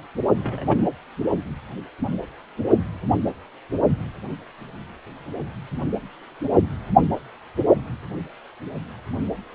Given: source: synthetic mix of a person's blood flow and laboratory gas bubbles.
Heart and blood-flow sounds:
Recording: Doppler ultrasound of blood flow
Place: precordium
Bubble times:
0.37-0.84 s: bubbles
From the record:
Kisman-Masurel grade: 111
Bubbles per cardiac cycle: 1 to 2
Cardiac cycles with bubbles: 1 to 10%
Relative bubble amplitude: barely perceptible (0.100 to 0.250)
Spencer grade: 1 (occasional bubble signal discernible with the cardiac motion signal, with majority of cardiac periods free of bubbles)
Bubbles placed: only in the low amplitude regions of the cardiac cycle

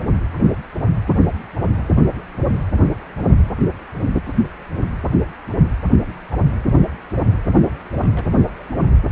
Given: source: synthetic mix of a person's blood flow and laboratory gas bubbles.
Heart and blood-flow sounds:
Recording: Doppler ultrasound of blood flow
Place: precordium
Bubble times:
4.26-4.40 s: bubbles
7.53-7.78 s: bubbles
8.00-8.28 s: bubbles
From the record:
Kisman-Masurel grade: 121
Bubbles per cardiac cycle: 1 to 2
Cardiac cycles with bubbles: 10 to 50%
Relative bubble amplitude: barely perceptible (0.100 to 0.250)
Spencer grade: 2 (many but less than half of the cardiac periods contain bubble signals, singularly or in groups)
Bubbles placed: anywhere in the cardiac cycle

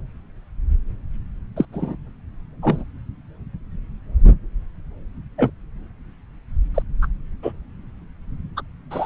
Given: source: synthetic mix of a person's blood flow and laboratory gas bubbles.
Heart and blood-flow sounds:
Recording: Doppler ultrasound of blood flow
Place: subclavian vein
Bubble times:
1.56-1.65 s: bubbles
1.73-1.96 s: bubbles
2.62-2.84 s: bubbles
5.38-5.50 s: bubbles
6.74-6.83 s: bubbles
7.02-7.08 s: bubbles
7.42-7.52 s: bubbles
8.56-8.62 s: bubbles
8.90-9.06 s: bubbles
From the record:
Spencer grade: 2 (many but less than half of the cardiac periods contain bubble signals, singularly or in groups)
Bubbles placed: anywhere in the cardiac cycle

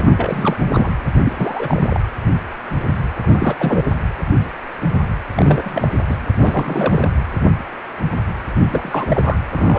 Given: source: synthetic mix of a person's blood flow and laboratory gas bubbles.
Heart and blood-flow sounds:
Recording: Doppler ultrasound of blood flow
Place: precordium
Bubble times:
0.00-0.56 s: bubbles
0.71-0.90 s: bubbles
1.25-2.02 s: bubbles
3.21-3.94 s: bubbles
5.35-5.91 s: bubbles
6.09-6.17 s: bubbles
6.37-7.08 s: bubbles
8.56-9.06 s: bubbles
9.08-9.38 s: bubbles
9.53-9.79 s: bubbles
From the record:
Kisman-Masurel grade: 332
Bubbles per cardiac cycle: rolling drumbeat, 9 or more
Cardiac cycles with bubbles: 50 to 99%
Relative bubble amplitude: moderate (0.250 to 0.450)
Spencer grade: 3 (all of the cardiac periods contain showers or single bubble signals, but not dominating or overriding the cardiac motion signals)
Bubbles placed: anywhere in the cardiac cycle

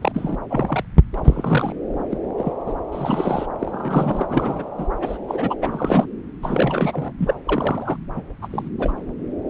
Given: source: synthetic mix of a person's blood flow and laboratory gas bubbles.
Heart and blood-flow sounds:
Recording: Doppler ultrasound of blood flow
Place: subclavian vein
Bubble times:
0.01-0.35 s: bubbles
0.50-0.83 s: bubbles
1.14-1.21 s: bubbles
1.24-1.75 s: bubbles
2.10-2.19 s: bubbles
2.38-2.52 s: bubbles
2.66-2.73 s: bubbles
2.92-3.46 s: bubbles
3.59-4.26 s: bubbles
4.29-4.66 s: bubbles
4.78-4.87 s: bubbles
5.00-5.18 s: bubbles
5.28-5.55 s: bubbles
5.62-6.14 s: bubbles
6.43-7.12 s: bubbles
7.19-7.33 s: bubbles
7.46-7.97 s: bubbles
8.14-8.21 s: bubbles
8.41-8.47 s: bubbles
8.50-8.68 s: bubbles
8.79-8.92 s: bubbles
From the record:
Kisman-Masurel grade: 242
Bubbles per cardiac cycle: several, 3 to 8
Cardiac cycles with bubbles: 100%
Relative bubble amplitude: moderate (0.250 to 0.450)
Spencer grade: 3 (all of the cardiac periods contain showers or single bubble signals, but not dominating or overriding the cardiac motion signals)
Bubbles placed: anywhere in the cardiac cycle

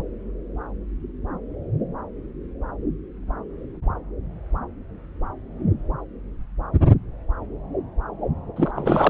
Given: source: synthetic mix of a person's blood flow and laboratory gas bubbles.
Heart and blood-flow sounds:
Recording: Doppler ultrasound of blood flow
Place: subclavian vein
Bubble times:
8.56-8.71 s: bubbles
8.75-9.10 s: bubbles
From the record:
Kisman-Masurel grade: 212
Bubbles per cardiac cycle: several, 3 to 8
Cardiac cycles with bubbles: 1 to 10%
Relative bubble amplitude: moderate (0.250 to 0.450)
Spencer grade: 1 (occasional bubble signal discernible with the cardiac motion signal, with majority of cardiac periods free of bubbles)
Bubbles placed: anywhere in the cardiac cycle

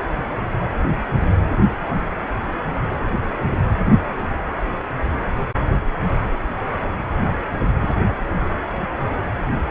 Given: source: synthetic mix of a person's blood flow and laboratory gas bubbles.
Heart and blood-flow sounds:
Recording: Doppler ultrasound of blood flow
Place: precordium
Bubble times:
7.82-7.96 s: bubbles
From the record:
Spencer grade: 1 (occasional bubble signal discernible with the cardiac motion signal, with majority of cardiac periods free of bubbles)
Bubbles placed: anywhere in the cardiac cycle

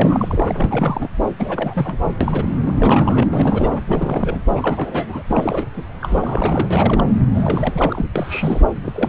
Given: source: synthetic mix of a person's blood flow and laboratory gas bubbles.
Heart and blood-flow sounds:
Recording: Doppler ultrasound of blood flow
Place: subclavian vein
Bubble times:
0.00-1.08 s: bubbles
1.38-1.97 s: bubbles
2.21-2.49 s: bubbles
2.66-3.27 s: bubbles
3.33-3.81 s: bubbles
3.87-4.41 s: bubbles
4.55-5.22 s: bubbles
5.30-5.68 s: bubbles
5.74-5.83 s: bubbles
6.01-7.06 s: bubbles
7.34-8.05 s: bubbles
8.15-8.62 s: bubbles
8.84-9.09 s: bubbles
From the record:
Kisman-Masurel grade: 342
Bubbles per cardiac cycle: rolling drumbeat, 9 or more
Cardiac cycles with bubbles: 100%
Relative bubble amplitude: moderate (0.250 to 0.450)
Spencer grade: 3 (all of the cardiac periods contain showers or single bubble signals, but not dominating or overriding the cardiac motion signals)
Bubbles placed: anywhere in the cardiac cycle

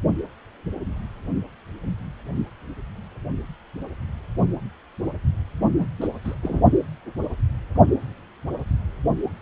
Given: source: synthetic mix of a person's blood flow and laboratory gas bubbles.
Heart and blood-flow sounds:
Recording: Doppler ultrasound of blood flow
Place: precordium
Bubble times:
5.60-5.67 s: bubbles
5.79-5.88 s: bubbles
6.00-6.08 s: bubbles
6.24-6.35 s: bubbles
6.42-6.61 s: bubbles
From the record:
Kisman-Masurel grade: 212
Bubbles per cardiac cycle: several, 3 to 8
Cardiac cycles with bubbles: 1 to 10%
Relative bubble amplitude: moderate (0.250 to 0.450)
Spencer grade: 1 (occasional bubble signal discernible with the cardiac motion signal, with majority of cardiac periods free of bubbles)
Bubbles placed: only in the low amplitude regions of the cardiac cycle

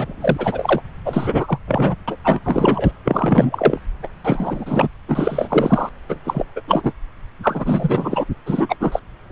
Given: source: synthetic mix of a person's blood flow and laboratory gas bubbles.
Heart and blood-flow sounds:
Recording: Doppler ultrasound of blood flow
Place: subclavian vein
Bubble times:
0.00-0.82 s: bubbles
1.06-1.58 s: bubbles
1.67-1.96 s: bubbles
2.08-2.17 s: bubbles
2.24-2.40 s: bubbles
2.44-2.92 s: bubbles
3.04-3.80 s: bubbles
4.02-4.08 s: bubbles
4.23-4.88 s: bubbles
5.07-5.89 s: bubbles
6.09-6.19 s: bubbles
6.24-6.46 s: bubbles
6.56-6.61 s: bubbles
6.67-6.92 s: bubbles
7.42-8.25 s: bubbles
8.46-8.76 s: bubbles
8.79-9.00 s: bubbles
9.29-9.32 s: bubbles
From the record:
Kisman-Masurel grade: 343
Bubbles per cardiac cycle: rolling drumbeat, 9 or more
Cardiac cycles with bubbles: 100%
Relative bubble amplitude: loud (0.450 to 0.775)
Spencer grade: 3 (all of the cardiac periods contain showers or single bubble signals, but not dominating or overriding the cardiac motion signals)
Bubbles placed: anywhere in the cardiac cycle

